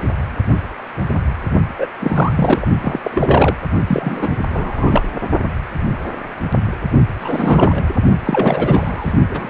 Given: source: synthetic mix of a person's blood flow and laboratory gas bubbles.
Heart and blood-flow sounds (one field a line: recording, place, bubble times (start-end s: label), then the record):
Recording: Doppler ultrasound of blood flow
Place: precordium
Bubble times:
1.78-1.87 s: bubbles
2.00-2.68 s: bubbles
2.80-3.00 s: bubbles
3.04-3.57 s: bubbles
3.87-4.35 s: bubbles
4.49-5.02 s: bubbles
7.21-7.96 s: bubbles
8.24-9.13 s: bubbles
9.30-9.50 s: bubbles
From the record:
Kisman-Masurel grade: 333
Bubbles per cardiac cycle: rolling drumbeat, 9 or more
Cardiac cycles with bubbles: 50 to 99%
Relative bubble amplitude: loud (0.450 to 0.775)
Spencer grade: 3 (all of the cardiac periods contain showers or single bubble signals, but not dominating or overriding the cardiac motion signals)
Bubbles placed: only in the low amplitude regions of the cardiac cycle